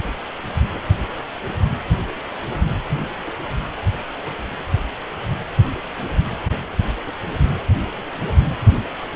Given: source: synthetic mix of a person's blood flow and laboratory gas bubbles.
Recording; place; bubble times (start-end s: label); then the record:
Doppler ultrasound of blood flow; precordium
no bubbles
From the record:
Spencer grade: 0 (complete lack of bubble signals)